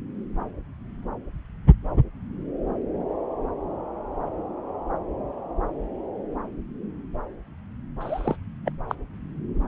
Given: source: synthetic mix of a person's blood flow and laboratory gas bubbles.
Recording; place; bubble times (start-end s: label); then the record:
Doppler ultrasound of blood flow; subclavian vein
8.00-8.37 s: bubbles
8.65-8.72 s: bubbles
8.89-8.95 s: bubbles
From the record:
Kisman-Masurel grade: 121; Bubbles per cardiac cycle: 1 to 2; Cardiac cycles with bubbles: 10 to 50%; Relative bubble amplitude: barely perceptible (0.100 to 0.250); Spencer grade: 2 (many but less than half of the cardiac periods contain bubble signals, singularly or in groups); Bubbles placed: anywhere in the cardiac cycle